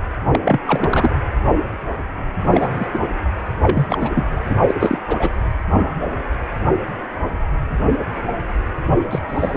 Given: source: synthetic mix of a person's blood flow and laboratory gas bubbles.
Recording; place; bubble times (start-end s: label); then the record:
Doppler ultrasound of blood flow; precordium
0.32-0.59 s: bubbles
0.66-1.10 s: bubbles
2.41-2.85 s: bubbles
2.93-2.99 s: bubbles
3.62-4.26 s: bubbles
4.49-4.55 s: bubbles
4.67-4.74 s: bubbles
4.80-4.98 s: bubbles
5.08-5.30 s: bubbles
9.11-9.19 s: bubbles
9.28-9.57 s: bubbles
From the record:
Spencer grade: 2 (many but less than half of the cardiac periods contain bubble signals, singularly or in groups); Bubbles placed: anywhere in the cardiac cycle